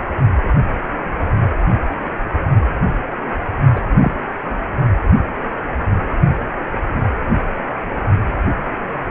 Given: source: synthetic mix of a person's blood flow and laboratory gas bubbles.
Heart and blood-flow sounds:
Doppler ultrasound of blood flow; precordium
3.76-3.80 s: bubbles
3.99-4.14 s: bubbles
From the record:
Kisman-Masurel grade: 113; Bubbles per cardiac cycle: 1 to 2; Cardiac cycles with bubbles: 1 to 10%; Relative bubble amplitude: loud (0.450 to 0.775); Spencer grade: 1 (occasional bubble signal discernible with the cardiac motion signal, with majority of cardiac periods free of bubbles); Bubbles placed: anywhere in the cardiac cycle

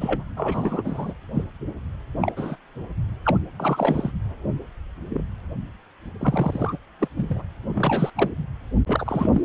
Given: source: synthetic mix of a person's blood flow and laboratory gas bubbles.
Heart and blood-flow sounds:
Doppler ultrasound of blood flow; precordium
0.01-0.23 s: bubbles
0.36-1.14 s: bubbles
1.34-1.45 s: bubbles
2.21-2.33 s: bubbles
2.36-2.56 s: bubbles
3.25-3.38 s: bubbles
3.60-4.11 s: bubbles
5.09-5.22 s: bubbles
6.20-6.78 s: bubbles
7.00-7.07 s: bubbles
7.17-7.43 s: bubbles
7.68-8.10 s: bubbles
8.17-8.30 s: bubbles
8.87-9.42 s: bubbles
From the record:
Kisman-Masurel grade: 232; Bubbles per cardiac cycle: several, 3 to 8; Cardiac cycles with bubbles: 50 to 99%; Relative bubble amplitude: moderate (0.250 to 0.450); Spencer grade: 3 (all of the cardiac periods contain showers or single bubble signals, but not dominating or overriding the cardiac motion signals); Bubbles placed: anywhere in the cardiac cycle

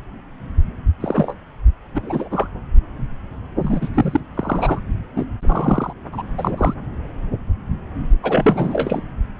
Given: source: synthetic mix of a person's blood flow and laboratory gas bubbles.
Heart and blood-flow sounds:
Doppler ultrasound of blood flow; subclavian vein
1.00-1.34 s: bubbles
1.95-2.28 s: bubbles
2.31-2.48 s: bubbles
3.58-3.89 s: bubbles
3.94-4.21 s: bubbles
4.34-4.79 s: bubbles
5.16-5.25 s: bubbles
5.42-5.92 s: bubbles
6.12-6.23 s: bubbles
6.38-6.74 s: bubbles
8.22-9.00 s: bubbles
9.38-9.40 s: bubbles
From the record:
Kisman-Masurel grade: 332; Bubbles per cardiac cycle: rolling drumbeat, 9 or more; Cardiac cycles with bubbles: 50 to 99%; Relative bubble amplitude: moderate (0.250 to 0.450); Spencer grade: 3 (all of the cardiac periods contain showers or single bubble signals, but not dominating or overriding the cardiac motion signals); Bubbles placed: anywhere in the cardiac cycle

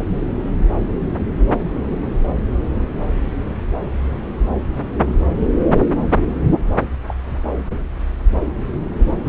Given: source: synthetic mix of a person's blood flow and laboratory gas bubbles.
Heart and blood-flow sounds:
Doppler ultrasound of blood flow; subclavian vein
7.07-7.14 s: bubbles
9.17-9.29 s: bubbles
From the record:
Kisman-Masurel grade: 121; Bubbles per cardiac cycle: 1 to 2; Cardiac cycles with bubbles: 10 to 50%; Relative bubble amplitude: barely perceptible (0.100 to 0.250); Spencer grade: 2 (many but less than half of the cardiac periods contain bubble signals, singularly or in groups); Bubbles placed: anywhere in the cardiac cycle

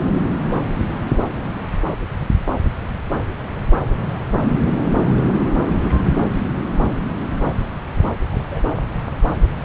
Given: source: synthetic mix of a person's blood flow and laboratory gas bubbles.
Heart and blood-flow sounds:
Doppler ultrasound of blood flow; subclavian vein
8.31-8.63 s: bubbles
From the record:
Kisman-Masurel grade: 111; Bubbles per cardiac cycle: 1 to 2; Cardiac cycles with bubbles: 1 to 10%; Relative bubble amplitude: barely perceptible (0.100 to 0.250); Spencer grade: 1 (occasional bubble signal discernible with the cardiac motion signal, with majority of cardiac periods free of bubbles); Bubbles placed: anywhere in the cardiac cycle

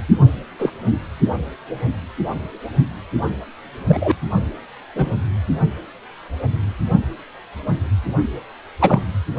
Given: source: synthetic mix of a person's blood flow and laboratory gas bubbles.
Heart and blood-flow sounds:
Doppler ultrasound of blood flow; precordium
0.58-0.70 s: bubbles
3.89-4.12 s: bubbles
4.96-5.12 s: bubbles
8.80-9.01 s: bubbles
From the record:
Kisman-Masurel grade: 123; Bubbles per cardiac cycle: 1 to 2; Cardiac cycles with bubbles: 10 to 50%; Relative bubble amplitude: loud (0.450 to 0.775); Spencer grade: 2 (many but less than half of the cardiac periods contain bubble signals, singularly or in groups); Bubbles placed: anywhere in the cardiac cycle

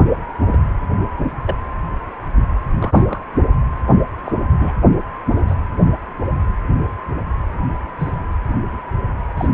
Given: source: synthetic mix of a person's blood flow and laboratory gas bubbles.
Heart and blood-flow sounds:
Doppler ultrasound of blood flow; precordium
0.48-0.58 s: bubbles
1.45-1.55 s: bubbles
2.79-3.24 s: bubbles
4.25-4.32 s: bubbles
4.58-4.73 s: bubbles
5.37-5.43 s: bubbles
5.48-5.56 s: bubbles
7.99-8.12 s: bubbles
9.37-9.48 s: bubbles
From the record:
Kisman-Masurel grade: 122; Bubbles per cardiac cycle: 1 to 2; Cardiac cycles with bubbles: 10 to 50%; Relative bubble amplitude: moderate (0.250 to 0.450); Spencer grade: 2 (many but less than half of the cardiac periods contain bubble signals, singularly or in groups); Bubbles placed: anywhere in the cardiac cycle

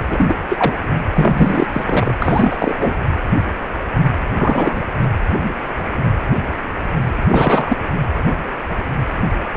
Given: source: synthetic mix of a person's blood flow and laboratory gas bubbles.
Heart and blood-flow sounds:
Doppler ultrasound of blood flow; precordium
0.07-0.35 s: bubbles
0.49-0.72 s: bubbles
1.10-1.67 s: bubbles
1.73-2.14 s: bubbles
2.20-2.95 s: bubbles
4.37-4.80 s: bubbles
7.27-7.77 s: bubbles
From the record:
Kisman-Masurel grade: 223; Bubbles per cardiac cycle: several, 3 to 8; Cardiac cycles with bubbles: 10 to 50%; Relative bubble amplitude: loud (0.450 to 0.775); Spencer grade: 2 (many but less than half of the cardiac periods contain bubble signals, singularly or in groups); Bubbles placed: anywhere in the cardiac cycle

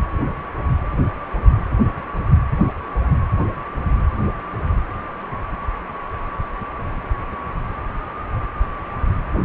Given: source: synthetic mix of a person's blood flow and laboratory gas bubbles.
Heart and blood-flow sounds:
Doppler ultrasound of blood flow; precordium
9.41-9.45 s: bubbles
From the record:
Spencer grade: 1 (occasional bubble signal discernible with the cardiac motion signal, with majority of cardiac periods free of bubbles); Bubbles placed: anywhere in the cardiac cycle

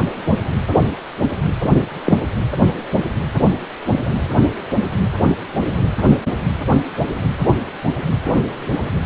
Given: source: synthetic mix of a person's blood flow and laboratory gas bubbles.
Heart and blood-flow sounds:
Doppler ultrasound of blood flow; precordium
2.04-2.18 s: bubbles
From the record:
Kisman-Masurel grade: 113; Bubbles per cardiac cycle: 1 to 2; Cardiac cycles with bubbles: 1 to 10%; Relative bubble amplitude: loud (0.450 to 0.775); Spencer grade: 1 (occasional bubble signal discernible with the cardiac motion signal, with majority of cardiac periods free of bubbles); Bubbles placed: anywhere in the cardiac cycle

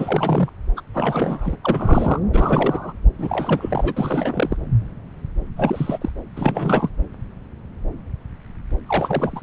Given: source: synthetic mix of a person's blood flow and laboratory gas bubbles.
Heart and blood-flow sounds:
Doppler ultrasound of blood flow; subclavian vein
0.00-0.49 s: bubbles
0.77-0.81 s: bubbles
0.93-1.56 s: bubbles
1.64-2.20 s: bubbles
2.33-2.93 s: bubbles
3.18-4.57 s: bubbles
5.57-5.98 s: bubbles
6.01-6.09 s: bubbles
6.36-6.89 s: bubbles
8.86-9.42 s: bubbles
From the record:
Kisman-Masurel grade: 332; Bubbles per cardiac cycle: rolling drumbeat, 9 or more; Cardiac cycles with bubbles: 50 to 99%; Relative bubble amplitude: moderate (0.250 to 0.450); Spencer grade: 3 (all of the cardiac periods contain showers or single bubble signals, but not dominating or overriding the cardiac motion signals); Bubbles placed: anywhere in the cardiac cycle

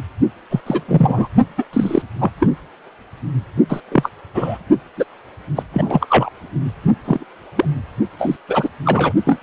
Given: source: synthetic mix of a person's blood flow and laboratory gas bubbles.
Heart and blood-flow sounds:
Doppler ultrasound of blood flow; precordium
0.49-0.61 s: bubbles
0.66-0.81 s: bubbles
0.88-1.29 s: bubbles
1.58-1.65 s: bubbles
1.73-2.02 s: bubbles
2.19-2.31 s: bubbles
2.40-2.50 s: bubbles
3.69-3.80 s: bubbles
3.91-4.10 s: bubbles
4.34-4.58 s: bubbles
4.97-5.04 s: bubbles
5.56-5.63 s: bubbles
5.73-6.07 s: bubbles
6.09-6.29 s: bubbles
7.04-7.25 s: bubbles
7.56-7.65 s: bubbles
8.18-8.37 s: bubbles
8.48-8.69 s: bubbles
8.85-9.13 s: bubbles
9.25-9.43 s: bubbles
From the record:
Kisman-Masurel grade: 243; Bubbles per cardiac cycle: several, 3 to 8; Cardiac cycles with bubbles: 100%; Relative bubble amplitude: loud (0.450 to 0.775); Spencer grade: 3 (all of the cardiac periods contain showers or single bubble signals, but not dominating or overriding the cardiac motion signals); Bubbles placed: only in the low amplitude regions of the cardiac cycle

